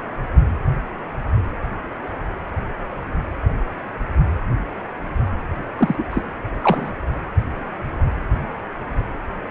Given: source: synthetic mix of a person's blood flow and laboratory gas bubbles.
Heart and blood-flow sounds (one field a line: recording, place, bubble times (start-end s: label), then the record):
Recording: Doppler ultrasound of blood flow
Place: precordium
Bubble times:
5.78-6.04 s: bubbles
6.10-6.25 s: bubbles
6.61-6.92 s: bubbles
From the record:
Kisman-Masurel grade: 213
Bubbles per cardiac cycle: several, 3 to 8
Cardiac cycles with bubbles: 1 to 10%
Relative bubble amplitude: loud (0.450 to 0.775)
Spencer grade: 1 (occasional bubble signal discernible with the cardiac motion signal, with majority of cardiac periods free of bubbles)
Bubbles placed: anywhere in the cardiac cycle